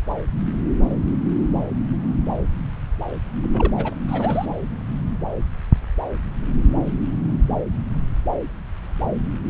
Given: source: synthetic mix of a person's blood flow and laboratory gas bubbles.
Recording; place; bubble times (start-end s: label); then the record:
Doppler ultrasound of blood flow; subclavian vein
3.43-3.94 s: bubbles
4.08-4.46 s: bubbles
From the record:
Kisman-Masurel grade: 221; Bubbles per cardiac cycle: several, 3 to 8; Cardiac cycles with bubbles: 10 to 50%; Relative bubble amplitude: barely perceptible (0.100 to 0.250); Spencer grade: 2 (many but less than half of the cardiac periods contain bubble signals, singularly or in groups); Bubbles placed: anywhere in the cardiac cycle